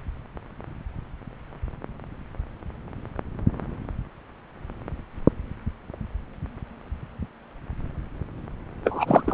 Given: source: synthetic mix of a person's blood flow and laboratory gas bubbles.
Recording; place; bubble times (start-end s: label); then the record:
Doppler ultrasound of blood flow; subclavian vein
8.84-9.34 s: bubbles
From the record:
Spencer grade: 1 (occasional bubble signal discernible with the cardiac motion signal, with majority of cardiac periods free of bubbles); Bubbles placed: anywhere in the cardiac cycle